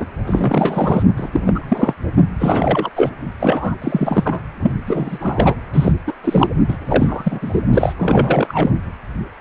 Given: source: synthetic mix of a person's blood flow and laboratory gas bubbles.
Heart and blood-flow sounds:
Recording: Doppler ultrasound of blood flow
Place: precordium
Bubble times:
0.00-0.05 s: bubbles
0.27-1.06 s: bubbles
1.16-1.40 s: bubbles
1.46-1.94 s: bubbles
2.39-2.90 s: bubbles
2.96-3.11 s: bubbles
3.40-3.76 s: bubbles
3.81-4.40 s: bubbles
4.62-4.72 s: bubbles
4.86-5.55 s: bubbles
5.74-5.94 s: bubbles
6.07-6.14 s: bubbles
6.24-6.50 s: bubbles
6.68-6.77 s: bubbles
6.89-7.39 s: bubbles
7.42-7.60 s: bubbles
7.70-7.93 s: bubbles
7.99-8.72 s: bubbles
From the record:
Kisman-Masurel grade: 343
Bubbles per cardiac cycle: rolling drumbeat, 9 or more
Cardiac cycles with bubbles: 100%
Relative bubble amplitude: loud (0.450 to 0.775)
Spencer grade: 3 (all of the cardiac periods contain showers or single bubble signals, but not dominating or overriding the cardiac motion signals)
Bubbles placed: anywhere in the cardiac cycle

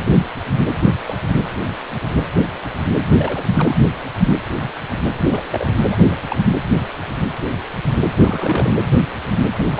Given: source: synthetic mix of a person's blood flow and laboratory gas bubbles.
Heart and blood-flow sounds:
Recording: Doppler ultrasound of blood flow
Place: precordium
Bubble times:
1.06-1.18 s: bubbles
1.25-1.41 s: bubbles
3.19-3.44 s: bubbles
3.55-3.75 s: bubbles
5.17-5.45 s: bubbles
5.51-5.67 s: bubbles
5.90-5.97 s: bubbles
6.07-6.16 s: bubbles
6.28-6.37 s: bubbles
8.17-8.75 s: bubbles
9.56-9.67 s: bubbles
9.71-9.80 s: bubbles
From the record:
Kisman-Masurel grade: 222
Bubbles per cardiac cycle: several, 3 to 8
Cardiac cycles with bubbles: 10 to 50%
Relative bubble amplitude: moderate (0.250 to 0.450)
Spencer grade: 2 (many but less than half of the cardiac periods contain bubble signals, singularly or in groups)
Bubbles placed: anywhere in the cardiac cycle

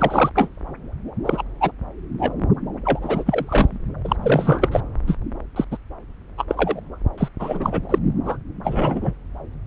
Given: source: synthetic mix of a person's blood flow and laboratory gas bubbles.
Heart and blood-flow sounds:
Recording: Doppler ultrasound of blood flow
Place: subclavian vein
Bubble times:
0.00-0.30 s: bubbles
0.35-0.50 s: bubbles
1.25-1.43 s: bubbles
1.60-1.72 s: bubbles
2.19-2.31 s: bubbles
2.85-3.00 s: bubbles
3.02-3.89 s: bubbles
4.04-4.16 s: bubbles
4.22-4.80 s: bubbles
5.07-5.16 s: bubbles
5.56-5.64 s: bubbles
5.71-5.77 s: bubbles
6.37-6.45 s: bubbles
6.48-6.80 s: bubbles
7.17-7.28 s: bubbles
7.39-7.80 s: bubbles
7.89-7.99 s: bubbles
8.25-8.37 s: bubbles
8.63-9.13 s: bubbles
From the record:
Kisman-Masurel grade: 243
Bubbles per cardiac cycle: several, 3 to 8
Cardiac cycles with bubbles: 100%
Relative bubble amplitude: loud (0.450 to 0.775)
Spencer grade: 3 (all of the cardiac periods contain showers or single bubble signals, but not dominating or overriding the cardiac motion signals)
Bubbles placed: anywhere in the cardiac cycle

